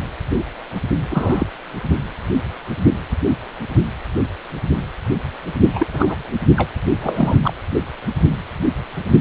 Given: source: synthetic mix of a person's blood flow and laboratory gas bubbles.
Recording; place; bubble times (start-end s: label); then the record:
Doppler ultrasound of blood flow; precordium
1.10-1.47 s: bubbles
5.73-5.87 s: bubbles
5.93-6.16 s: bubbles
6.56-6.69 s: bubbles
7.01-7.37 s: bubbles
7.43-7.54 s: bubbles
From the record:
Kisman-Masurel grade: 222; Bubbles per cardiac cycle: several, 3 to 8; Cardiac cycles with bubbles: 10 to 50%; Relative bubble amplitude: moderate (0.250 to 0.450); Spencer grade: 2 (many but less than half of the cardiac periods contain bubble signals, singularly or in groups); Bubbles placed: only in the low amplitude regions of the cardiac cycle